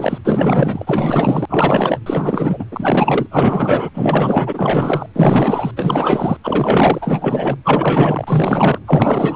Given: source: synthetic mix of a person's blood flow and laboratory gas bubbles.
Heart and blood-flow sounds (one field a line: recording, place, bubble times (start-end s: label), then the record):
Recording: Doppler ultrasound of blood flow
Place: precordium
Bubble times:
0.00-0.18 s: bubbles
0.24-1.46 s: bubbles
1.49-1.99 s: bubbles
2.06-2.65 s: bubbles
2.71-3.26 s: bubbles
3.31-3.89 s: bubbles
3.93-5.06 s: bubbles
5.13-5.71 s: bubbles
5.76-6.37 s: bubbles
6.44-7.56 s: bubbles
7.64-8.79 s: bubbles
8.87-9.36 s: bubbles
From the record:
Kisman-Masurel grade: 444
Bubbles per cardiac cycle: continuous sound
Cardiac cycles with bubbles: 100%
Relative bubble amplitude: maximal (0.775 to 0.999)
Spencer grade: 4 (maximum detectable bubble signal sounding continuously throughout systole and diastole of every cardiac period, and overriding the amplitude of the normal cardiac signals)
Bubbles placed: anywhere in the cardiac cycle